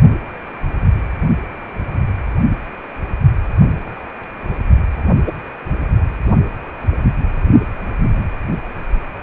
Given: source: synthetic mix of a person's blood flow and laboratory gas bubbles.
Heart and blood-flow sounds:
Doppler ultrasound of blood flow; precordium
5.26-5.33 s: bubbles
From the record:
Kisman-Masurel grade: 113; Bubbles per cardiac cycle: 1 to 2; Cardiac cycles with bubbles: 1 to 10%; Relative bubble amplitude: loud (0.450 to 0.775); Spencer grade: 1 (occasional bubble signal discernible with the cardiac motion signal, with majority of cardiac periods free of bubbles); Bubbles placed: anywhere in the cardiac cycle

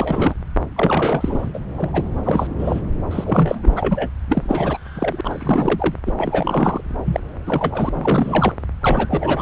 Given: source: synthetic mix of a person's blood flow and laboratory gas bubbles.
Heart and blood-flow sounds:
Doppler ultrasound of blood flow; subclavian vein
0.00-0.34 s: bubbles
0.76-1.59 s: bubbles
1.77-1.90 s: bubbles
1.93-2.03 s: bubbles
2.24-2.47 s: bubbles
2.58-2.81 s: bubbles
3.10-4.10 s: bubbles
4.29-4.78 s: bubbles
4.95-5.21 s: bubbles
5.24-5.95 s: bubbles
6.06-6.12 s: bubbles
6.18-6.81 s: bubbles
7.04-7.20 s: bubbles
7.46-7.89 s: bubbles
7.95-8.54 s: bubbles
8.81-9.42 s: bubbles
From the record:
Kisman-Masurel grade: 342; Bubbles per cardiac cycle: rolling drumbeat, 9 or more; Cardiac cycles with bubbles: 100%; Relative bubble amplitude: moderate (0.250 to 0.450); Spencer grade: 3 (all of the cardiac periods contain showers or single bubble signals, but not dominating or overriding the cardiac motion signals); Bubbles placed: anywhere in the cardiac cycle

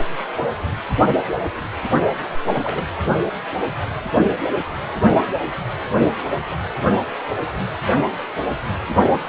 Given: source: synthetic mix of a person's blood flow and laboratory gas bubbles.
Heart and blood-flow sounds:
Doppler ultrasound of blood flow; precordium
2.29-2.37 s: bubbles
2.53-2.84 s: bubbles
From the record:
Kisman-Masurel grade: 211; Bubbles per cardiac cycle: several, 3 to 8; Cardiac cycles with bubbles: 1 to 10%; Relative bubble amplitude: barely perceptible (0.100 to 0.250); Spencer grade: 1 (occasional bubble signal discernible with the cardiac motion signal, with majority of cardiac periods free of bubbles); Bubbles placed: only in the low amplitude regions of the cardiac cycle

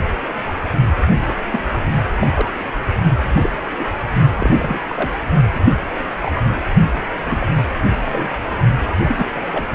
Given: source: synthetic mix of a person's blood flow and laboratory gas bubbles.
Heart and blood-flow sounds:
Doppler ultrasound of blood flow; precordium
1.28-1.35 s: bubbles
1.37-1.44 s: bubbles
1.52-1.59 s: bubbles
1.65-1.69 s: bubbles
2.19-2.27 s: bubbles
2.35-2.46 s: bubbles
3.35-3.50 s: bubbles
3.79-3.85 s: bubbles
4.38-4.84 s: bubbles
4.88-5.10 s: bubbles
5.54-5.61 s: bubbles
6.13-6.43 s: bubbles
7.30-7.46 s: bubbles
8.04-8.39 s: bubbles
8.88-8.92 s: bubbles
9.04-9.30 s: bubbles
9.36-9.40 s: bubbles
9.51-9.66 s: bubbles
From the record:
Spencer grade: 3 (all of the cardiac periods contain showers or single bubble signals, but not dominating or overriding the cardiac motion signals); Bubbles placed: only in the low amplitude regions of the cardiac cycle

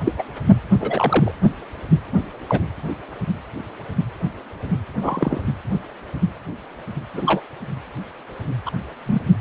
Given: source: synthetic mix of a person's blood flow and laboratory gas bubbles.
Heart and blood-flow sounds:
Doppler ultrasound of blood flow; precordium
0.04-0.12 s: bubbles
0.18-0.22 s: bubbles
0.80-1.32 s: bubbles
2.48-2.62 s: bubbles
5.01-5.40 s: bubbles
7.13-7.41 s: bubbles
8.66-8.71 s: bubbles
9.05-9.22 s: bubbles
From the record:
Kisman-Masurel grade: 122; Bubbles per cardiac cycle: 1 to 2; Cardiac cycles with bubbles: 10 to 50%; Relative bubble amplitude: moderate (0.250 to 0.450); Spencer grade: 2 (many but less than half of the cardiac periods contain bubble signals, singularly or in groups); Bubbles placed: anywhere in the cardiac cycle

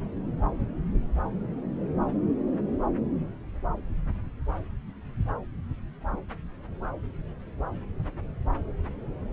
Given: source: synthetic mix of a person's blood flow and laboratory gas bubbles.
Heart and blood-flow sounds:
Doppler ultrasound of blood flow; subclavian vein
no bubbles
From the record:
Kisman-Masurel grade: 000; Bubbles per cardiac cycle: 0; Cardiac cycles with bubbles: 0%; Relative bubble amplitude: no bubbles discernible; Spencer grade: 0 (complete lack of bubble signals)

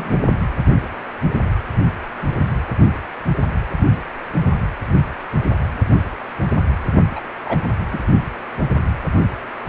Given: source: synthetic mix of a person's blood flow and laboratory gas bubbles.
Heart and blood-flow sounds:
Doppler ultrasound of blood flow; precordium
0.00-0.19 s: bubbles
7.15-7.21 s: bubbles
7.45-7.62 s: bubbles
7.92-7.99 s: bubbles
From the record:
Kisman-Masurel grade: 122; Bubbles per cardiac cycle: 1 to 2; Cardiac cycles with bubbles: 10 to 50%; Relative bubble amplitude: moderate (0.250 to 0.450); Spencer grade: 2 (many but less than half of the cardiac periods contain bubble signals, singularly or in groups); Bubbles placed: anywhere in the cardiac cycle

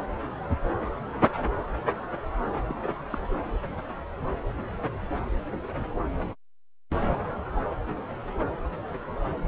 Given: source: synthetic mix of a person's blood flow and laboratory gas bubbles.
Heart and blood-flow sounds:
Doppler ultrasound of blood flow; subclavian vein
2.67-2.75 s: bubbles
3.10-3.19 s: bubbles
From the record:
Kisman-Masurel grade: 221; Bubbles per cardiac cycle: several, 3 to 8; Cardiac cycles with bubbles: 10 to 50%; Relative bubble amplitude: barely perceptible (0.100 to 0.250); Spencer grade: 2 (many but less than half of the cardiac periods contain bubble signals, singularly or in groups); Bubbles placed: anywhere in the cardiac cycle

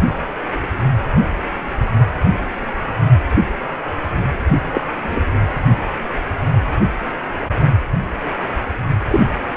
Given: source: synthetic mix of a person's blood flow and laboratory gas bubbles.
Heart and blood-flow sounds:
Doppler ultrasound of blood flow; precordium
4.72-4.81 s: bubbles
4.96-5.32 s: bubbles
9.10-9.23 s: bubbles
From the record:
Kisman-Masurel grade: 122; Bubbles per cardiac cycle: 1 to 2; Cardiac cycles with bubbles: 10 to 50%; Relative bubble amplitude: moderate (0.250 to 0.450); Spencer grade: 2 (many but less than half of the cardiac periods contain bubble signals, singularly or in groups); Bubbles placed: only in the low amplitude regions of the cardiac cycle

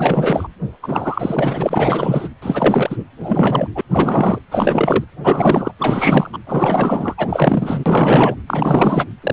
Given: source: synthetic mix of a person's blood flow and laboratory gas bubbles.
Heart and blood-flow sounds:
Doppler ultrasound of blood flow; precordium
0.00-0.48 s: bubbles
0.82-2.28 s: bubbles
2.42-3.05 s: bubbles
3.20-3.68 s: bubbles
3.75-3.81 s: bubbles
3.90-4.39 s: bubbles
4.51-5.04 s: bubbles
5.24-5.71 s: bubbles
5.78-6.30 s: bubbles
6.33-6.39 s: bubbles
6.46-7.15 s: bubbles
7.17-8.35 s: bubbles
8.46-9.05 s: bubbles
9.22-9.33 s: bubbles
From the record:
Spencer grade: 4 (maximum detectable bubble signal sounding continuously throughout systole and diastole of every cardiac period, and overriding the amplitude of the normal cardiac signals); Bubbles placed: anywhere in the cardiac cycle

